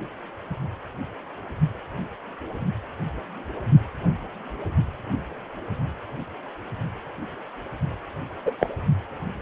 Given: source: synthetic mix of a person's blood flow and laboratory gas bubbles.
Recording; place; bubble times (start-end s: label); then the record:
Doppler ultrasound of blood flow; precordium
8.46-8.51 s: bubbles
8.60-8.70 s: bubbles
From the record:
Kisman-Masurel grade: 122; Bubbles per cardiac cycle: 1 to 2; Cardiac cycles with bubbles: 10 to 50%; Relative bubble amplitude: moderate (0.250 to 0.450); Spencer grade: 2 (many but less than half of the cardiac periods contain bubble signals, singularly or in groups); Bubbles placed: only in the low amplitude regions of the cardiac cycle